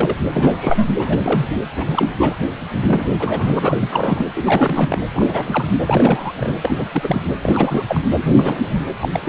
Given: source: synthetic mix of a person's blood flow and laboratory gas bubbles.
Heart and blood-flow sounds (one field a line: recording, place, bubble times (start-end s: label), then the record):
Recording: Doppler ultrasound of blood flow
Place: precordium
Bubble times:
0.00-0.15 s: bubbles
0.32-0.86 s: bubbles
0.98-1.17 s: bubbles
1.23-1.47 s: bubbles
1.50-1.58 s: bubbles
1.77-1.85 s: bubbles
1.87-2.11 s: bubbles
2.17-2.35 s: bubbles
2.86-3.06 s: bubbles
3.08-3.77 s: bubbles
3.80-4.26 s: bubbles
4.35-5.01 s: bubbles
5.13-5.67 s: bubbles
5.86-6.52 s: bubbles
6.62-6.84 s: bubbles
6.92-7.21 s: bubbles
7.42-7.83 s: bubbles
7.88-8.00 s: bubbles
8.36-8.82 s: bubbles
9.00-9.08 s: bubbles
9.12-9.29 s: bubbles
From the record:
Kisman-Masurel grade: 342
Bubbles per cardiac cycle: rolling drumbeat, 9 or more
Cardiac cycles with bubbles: 100%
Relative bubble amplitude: moderate (0.250 to 0.450)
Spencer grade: 3 (all of the cardiac periods contain showers or single bubble signals, but not dominating or overriding the cardiac motion signals)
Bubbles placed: anywhere in the cardiac cycle